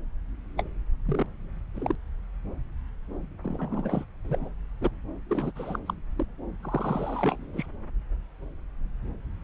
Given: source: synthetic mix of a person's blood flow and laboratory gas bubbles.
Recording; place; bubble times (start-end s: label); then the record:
Doppler ultrasound of blood flow; subclavian vein
0.57-0.63 s: bubbles
1.05-1.26 s: bubbles
1.74-1.95 s: bubbles
3.42-4.04 s: bubbles
4.24-4.49 s: bubbles
4.81-4.91 s: bubbles
5.29-5.51 s: bubbles
5.55-5.78 s: bubbles
5.88-5.93 s: bubbles
6.17-6.26 s: bubbles
6.63-7.66 s: bubbles
From the record:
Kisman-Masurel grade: 221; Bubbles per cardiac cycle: several, 3 to 8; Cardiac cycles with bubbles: 10 to 50%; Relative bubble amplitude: barely perceptible (0.100 to 0.250); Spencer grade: 2 (many but less than half of the cardiac periods contain bubble signals, singularly or in groups); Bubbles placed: anywhere in the cardiac cycle